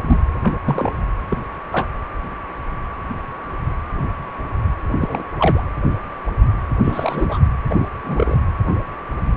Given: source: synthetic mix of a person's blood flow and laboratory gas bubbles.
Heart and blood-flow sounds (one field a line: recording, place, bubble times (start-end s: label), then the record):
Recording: Doppler ultrasound of blood flow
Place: precordium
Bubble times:
0.07-0.20 s: bubbles
0.43-0.54 s: bubbles
0.64-0.92 s: bubbles
1.31-1.38 s: bubbles
1.71-1.87 s: bubbles
4.93-5.24 s: bubbles
5.38-5.63 s: bubbles
6.83-7.39 s: bubbles
7.67-7.88 s: bubbles
8.04-8.38 s: bubbles
From the record:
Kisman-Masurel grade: 232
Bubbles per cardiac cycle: several, 3 to 8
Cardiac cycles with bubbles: 50 to 99%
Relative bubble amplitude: moderate (0.250 to 0.450)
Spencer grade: 3 (all of the cardiac periods contain showers or single bubble signals, but not dominating or overriding the cardiac motion signals)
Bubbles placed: anywhere in the cardiac cycle